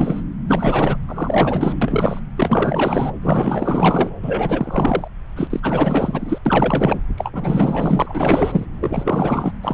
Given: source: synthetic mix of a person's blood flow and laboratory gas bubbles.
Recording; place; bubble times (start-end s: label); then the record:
Doppler ultrasound of blood flow; subclavian vein
0.00-0.23 s: bubbles
0.47-0.97 s: bubbles
1.08-1.75 s: bubbles
1.81-2.21 s: bubbles
2.37-3.11 s: bubbles
3.22-4.10 s: bubbles
4.22-5.08 s: bubbles
5.36-6.38 s: bubbles
6.45-7.04 s: bubbles
7.17-8.66 s: bubbles
8.80-9.52 s: bubbles
9.62-9.74 s: bubbles
From the record:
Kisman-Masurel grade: 444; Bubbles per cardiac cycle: continuous sound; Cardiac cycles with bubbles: 100%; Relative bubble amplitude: maximal (0.775 to 0.999); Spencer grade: 4 (maximum detectable bubble signal sounding continuously throughout systole and diastole of every cardiac period, and overriding the amplitude of the normal cardiac signals); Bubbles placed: anywhere in the cardiac cycle